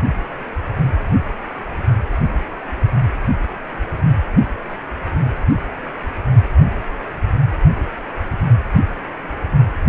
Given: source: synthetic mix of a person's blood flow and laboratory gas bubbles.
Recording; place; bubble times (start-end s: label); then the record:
Doppler ultrasound of blood flow; precordium
no bubbles
From the record:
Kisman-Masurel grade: 000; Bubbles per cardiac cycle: 0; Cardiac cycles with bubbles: 0%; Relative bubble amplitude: no bubbles discernible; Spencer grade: 0 (complete lack of bubble signals)